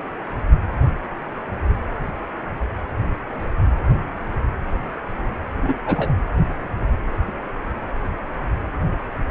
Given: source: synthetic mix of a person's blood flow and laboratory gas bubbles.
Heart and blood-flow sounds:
Doppler ultrasound of blood flow; precordium
5.62-5.74 s: bubbles
5.86-6.13 s: bubbles
From the record:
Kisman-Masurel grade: 213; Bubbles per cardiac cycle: several, 3 to 8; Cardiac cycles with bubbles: 1 to 10%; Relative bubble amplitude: loud (0.450 to 0.775); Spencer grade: 1 (occasional bubble signal discernible with the cardiac motion signal, with majority of cardiac periods free of bubbles); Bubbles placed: anywhere in the cardiac cycle

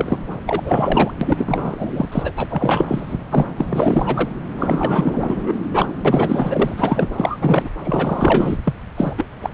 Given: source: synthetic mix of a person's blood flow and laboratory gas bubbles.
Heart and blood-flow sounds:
Doppler ultrasound of blood flow; subclavian vein
0.00-0.18 s: bubbles
0.46-1.11 s: bubbles
1.21-2.08 s: bubbles
2.12-2.31 s: bubbles
2.38-3.17 s: bubbles
3.30-3.49 s: bubbles
3.56-3.66 s: bubbles
3.70-4.29 s: bubbles
4.58-5.57 s: bubbles
5.72-5.87 s: bubbles
6.04-7.09 s: bubbles
7.16-7.38 s: bubbles
7.40-7.69 s: bubbles
7.84-8.58 s: bubbles
8.63-8.74 s: bubbles
8.96-9.13 s: bubbles
9.17-9.25 s: bubbles
9.42-9.51 s: bubbles
From the record:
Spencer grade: 4 (maximum detectable bubble signal sounding continuously throughout systole and diastole of every cardiac period, and overriding the amplitude of the normal cardiac signals); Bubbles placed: anywhere in the cardiac cycle

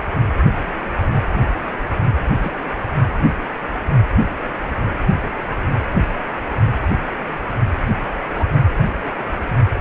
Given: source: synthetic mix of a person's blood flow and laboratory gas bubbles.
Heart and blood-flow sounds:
Doppler ultrasound of blood flow; precordium
2.42-2.54 s: bubbles
8.35-8.45 s: bubbles
From the record:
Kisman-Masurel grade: 122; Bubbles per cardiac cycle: 1 to 2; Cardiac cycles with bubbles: 10 to 50%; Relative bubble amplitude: moderate (0.250 to 0.450); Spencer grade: 2 (many but less than half of the cardiac periods contain bubble signals, singularly or in groups); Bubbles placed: anywhere in the cardiac cycle

